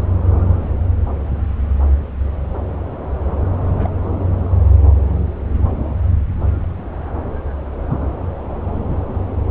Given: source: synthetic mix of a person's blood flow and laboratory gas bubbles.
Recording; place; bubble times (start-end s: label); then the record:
Doppler ultrasound of blood flow; subclavian vein
3.79-3.90 s: bubbles
From the record:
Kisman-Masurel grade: 111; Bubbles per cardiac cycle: 1 to 2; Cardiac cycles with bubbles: 1 to 10%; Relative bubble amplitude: barely perceptible (0.100 to 0.250); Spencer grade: 1 (occasional bubble signal discernible with the cardiac motion signal, with majority of cardiac periods free of bubbles); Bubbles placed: anywhere in the cardiac cycle